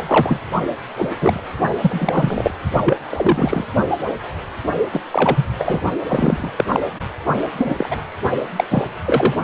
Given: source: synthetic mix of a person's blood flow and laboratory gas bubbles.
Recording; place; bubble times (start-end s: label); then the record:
Doppler ultrasound of blood flow; precordium
0.07-0.41 s: bubbles
0.97-1.09 s: bubbles
1.20-1.41 s: bubbles
1.81-2.51 s: bubbles
2.85-2.97 s: bubbles
3.10-3.65 s: bubbles
4.92-5.00 s: bubbles
5.11-5.46 s: bubbles
5.59-5.82 s: bubbles
6.08-6.50 s: bubbles
6.58-6.65 s: bubbles
6.69-6.80 s: bubbles
7.25-7.33 s: bubbles
7.58-7.75 s: bubbles
7.78-7.97 s: bubbles
8.56-8.64 s: bubbles
8.71-8.84 s: bubbles
9.05-9.35 s: bubbles
9.41-9.44 s: bubbles
From the record:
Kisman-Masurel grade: 233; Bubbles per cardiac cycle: several, 3 to 8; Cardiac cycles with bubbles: 50 to 99%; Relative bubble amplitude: loud (0.450 to 0.775); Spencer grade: 3 (all of the cardiac periods contain showers or single bubble signals, but not dominating or overriding the cardiac motion signals); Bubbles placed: only in the low amplitude regions of the cardiac cycle